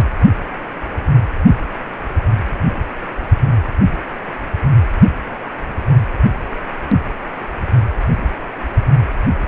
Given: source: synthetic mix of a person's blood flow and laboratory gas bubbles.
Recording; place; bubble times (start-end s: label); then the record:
Doppler ultrasound of blood flow; precordium
0.00-0.10 s: bubbles
From the record:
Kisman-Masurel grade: 111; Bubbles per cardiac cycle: 1 to 2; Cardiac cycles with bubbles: 1 to 10%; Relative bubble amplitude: barely perceptible (0.100 to 0.250); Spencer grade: 1 (occasional bubble signal discernible with the cardiac motion signal, with majority of cardiac periods free of bubbles); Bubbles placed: anywhere in the cardiac cycle